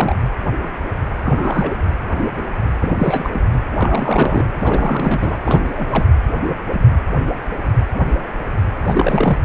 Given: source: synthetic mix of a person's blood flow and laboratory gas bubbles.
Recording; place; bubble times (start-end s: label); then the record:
Doppler ultrasound of blood flow; precordium
0.00-0.15 s: bubbles
1.23-1.75 s: bubbles
2.80-3.40 s: bubbles
3.71-4.47 s: bubbles
4.60-5.36 s: bubbles
5.43-5.59 s: bubbles
5.75-6.08 s: bubbles
8.87-9.38 s: bubbles
From the record:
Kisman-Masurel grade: 332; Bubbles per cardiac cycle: rolling drumbeat, 9 or more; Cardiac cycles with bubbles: 50 to 99%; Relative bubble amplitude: moderate (0.250 to 0.450); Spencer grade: 3 (all of the cardiac periods contain showers or single bubble signals, but not dominating or overriding the cardiac motion signals); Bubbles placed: anywhere in the cardiac cycle